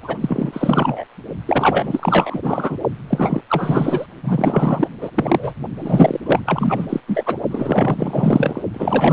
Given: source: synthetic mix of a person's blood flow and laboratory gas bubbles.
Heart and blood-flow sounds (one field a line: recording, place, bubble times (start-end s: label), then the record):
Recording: Doppler ultrasound of blood flow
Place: precordium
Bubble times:
0.02-0.18 s: bubbles
0.20-1.04 s: bubbles
1.46-2.77 s: bubbles
3.09-3.41 s: bubbles
3.48-4.06 s: bubbles
4.23-4.88 s: bubbles
5.01-5.10 s: bubbles
5.14-5.54 s: bubbles
5.75-6.21 s: bubbles
6.26-6.39 s: bubbles
6.45-6.87 s: bubbles
6.89-7.00 s: bubbles
7.07-7.23 s: bubbles
7.26-7.38 s: bubbles
7.51-8.62 s: bubbles
8.74-9.13 s: bubbles
From the record:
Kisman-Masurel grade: 444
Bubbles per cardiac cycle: continuous sound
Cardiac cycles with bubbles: 100%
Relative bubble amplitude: maximal (0.775 to 0.999)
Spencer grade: 4 (maximum detectable bubble signal sounding continuously throughout systole and diastole of every cardiac period, and overriding the amplitude of the normal cardiac signals)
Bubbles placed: only in the low amplitude regions of the cardiac cycle